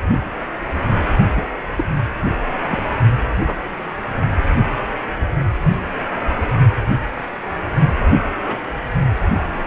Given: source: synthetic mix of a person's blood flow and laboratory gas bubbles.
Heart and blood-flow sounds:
Doppler ultrasound of blood flow; precordium
1.35-1.46 s: bubbles
1.76-1.84 s: bubbles
2.69-2.83 s: bubbles
3.30-3.58 s: bubbles
8.43-8.59 s: bubbles
From the record:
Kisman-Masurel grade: 122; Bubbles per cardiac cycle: 1 to 2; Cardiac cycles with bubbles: 10 to 50%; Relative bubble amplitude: moderate (0.250 to 0.450); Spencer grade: 2 (many but less than half of the cardiac periods contain bubble signals, singularly or in groups); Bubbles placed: anywhere in the cardiac cycle

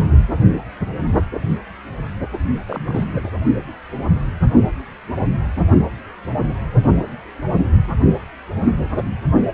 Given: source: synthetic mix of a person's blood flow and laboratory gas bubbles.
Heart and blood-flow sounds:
Doppler ultrasound of blood flow; precordium
2.68-3.04 s: bubbles
3.10-3.29 s: bubbles
From the record:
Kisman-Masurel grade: 212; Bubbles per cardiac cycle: several, 3 to 8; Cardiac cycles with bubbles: 1 to 10%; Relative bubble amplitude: moderate (0.250 to 0.450); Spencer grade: 1 (occasional bubble signal discernible with the cardiac motion signal, with majority of cardiac periods free of bubbles); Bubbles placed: only in the low amplitude regions of the cardiac cycle

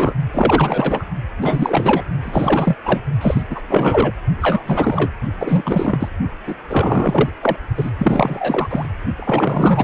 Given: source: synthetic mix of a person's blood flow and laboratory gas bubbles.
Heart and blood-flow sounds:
Doppler ultrasound of blood flow; precordium
0.00-0.13 s: bubbles
0.33-1.05 s: bubbles
1.40-2.02 s: bubbles
2.23-2.75 s: bubbles
2.84-3.02 s: bubbles
3.21-3.42 s: bubbles
3.50-3.61 s: bubbles
3.67-4.12 s: bubbles
4.41-4.62 s: bubbles
4.66-5.11 s: bubbles
5.38-6.08 s: bubbles
6.47-6.56 s: bubbles
6.70-7.30 s: bubbles
7.42-7.56 s: bubbles
7.77-7.90 s: bubbles
7.98-8.88 s: bubbles
9.17-9.84 s: bubbles
From the record:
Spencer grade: 4 (maximum detectable bubble signal sounding continuously throughout systole and diastole of every cardiac period, and overriding the amplitude of the normal cardiac signals); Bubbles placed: only in the low amplitude regions of the cardiac cycle

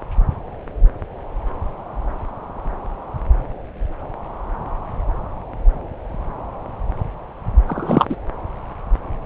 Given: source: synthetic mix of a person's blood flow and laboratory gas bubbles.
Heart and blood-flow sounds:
Doppler ultrasound of blood flow; subclavian vein
7.67-8.06 s: bubbles
8.09-8.16 s: bubbles
From the record:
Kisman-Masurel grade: 213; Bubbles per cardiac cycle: several, 3 to 8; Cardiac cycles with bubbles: 1 to 10%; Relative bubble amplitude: loud (0.450 to 0.775); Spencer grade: 1 (occasional bubble signal discernible with the cardiac motion signal, with majority of cardiac periods free of bubbles); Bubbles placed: anywhere in the cardiac cycle

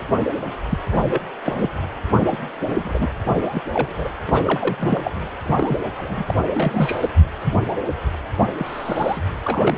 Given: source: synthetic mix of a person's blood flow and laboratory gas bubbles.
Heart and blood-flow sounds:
Doppler ultrasound of blood flow; precordium
0.11-0.18 s: bubbles
0.69-0.78 s: bubbles
0.91-0.96 s: bubbles
1.04-1.19 s: bubbles
1.44-1.70 s: bubbles
2.31-2.37 s: bubbles
2.70-3.08 s: bubbles
3.44-3.60 s: bubbles
3.73-4.09 s: bubbles
4.26-5.11 s: bubbles
5.39-5.77 s: bubbles
5.96-6.23 s: bubbles
6.26-6.34 s: bubbles
6.54-7.06 s: bubbles
8.57-9.21 s: bubbles
9.45-9.78 s: bubbles
From the record:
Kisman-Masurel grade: 232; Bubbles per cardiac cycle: several, 3 to 8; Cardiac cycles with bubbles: 50 to 99%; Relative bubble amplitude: moderate (0.250 to 0.450); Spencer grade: 3 (all of the cardiac periods contain showers or single bubble signals, but not dominating or overriding the cardiac motion signals); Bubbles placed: anywhere in the cardiac cycle

